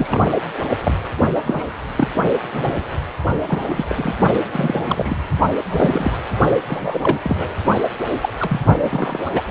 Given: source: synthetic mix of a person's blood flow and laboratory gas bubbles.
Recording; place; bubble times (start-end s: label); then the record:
Doppler ultrasound of blood flow; precordium
0.00-0.35 s: bubbles
0.83-0.94 s: bubbles
1.46-1.65 s: bubbles
1.97-2.08 s: bubbles
2.52-2.83 s: bubbles
3.47-3.85 s: bubbles
3.88-4.14 s: bubbles
4.33-4.49 s: bubbles
4.52-5.14 s: bubbles
5.71-6.18 s: bubbles
6.68-7.17 s: bubbles
7.23-7.54 s: bubbles
8.11-8.17 s: bubbles
8.21-8.29 s: bubbles
8.39-8.61 s: bubbles
8.80-9.20 s: bubbles
9.23-9.30 s: bubbles
9.34-9.43 s: bubbles
From the record:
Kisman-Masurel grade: 242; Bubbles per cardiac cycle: several, 3 to 8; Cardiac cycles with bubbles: 100%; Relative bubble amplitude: moderate (0.250 to 0.450); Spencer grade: 3 (all of the cardiac periods contain showers or single bubble signals, but not dominating or overriding the cardiac motion signals); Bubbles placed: only in the low amplitude regions of the cardiac cycle